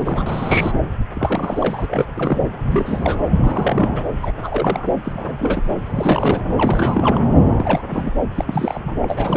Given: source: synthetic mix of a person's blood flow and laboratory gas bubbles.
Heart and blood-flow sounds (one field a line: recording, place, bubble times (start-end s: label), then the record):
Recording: Doppler ultrasound of blood flow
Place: subclavian vein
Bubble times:
0.00-0.79 s: bubbles
1.14-2.08 s: bubbles
2.14-2.51 s: bubbles
2.62-3.31 s: bubbles
3.40-3.91 s: bubbles
3.95-4.04 s: bubbles
4.22-4.32 s: bubbles
4.42-4.86 s: bubbles
5.04-5.75 s: bubbles
5.86-6.42 s: bubbles
6.58-7.18 s: bubbles
7.48-7.83 s: bubbles
7.90-8.12 s: bubbles
8.36-8.97 s: bubbles
9.02-9.37 s: bubbles
From the record:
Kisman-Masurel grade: 342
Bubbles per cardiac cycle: rolling drumbeat, 9 or more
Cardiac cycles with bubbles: 100%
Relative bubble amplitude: moderate (0.250 to 0.450)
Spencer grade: 3 (all of the cardiac periods contain showers or single bubble signals, but not dominating or overriding the cardiac motion signals)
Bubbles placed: anywhere in the cardiac cycle